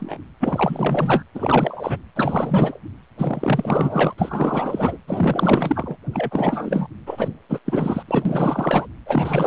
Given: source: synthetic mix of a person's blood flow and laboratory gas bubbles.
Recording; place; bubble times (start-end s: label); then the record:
Doppler ultrasound of blood flow; precordium
0.00-0.20 s: bubbles
0.39-1.23 s: bubbles
1.34-1.98 s: bubbles
2.15-2.79 s: bubbles
3.17-4.13 s: bubbles
4.18-4.98 s: bubbles
5.07-5.97 s: bubbles
6.13-6.87 s: bubbles
7.06-7.28 s: bubbles
7.49-7.58 s: bubbles
7.65-8.03 s: bubbles
8.07-8.87 s: bubbles
9.05-9.47 s: bubbles
From the record:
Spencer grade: 4 (maximum detectable bubble signal sounding continuously throughout systole and diastole of every cardiac period, and overriding the amplitude of the normal cardiac signals); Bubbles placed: anywhere in the cardiac cycle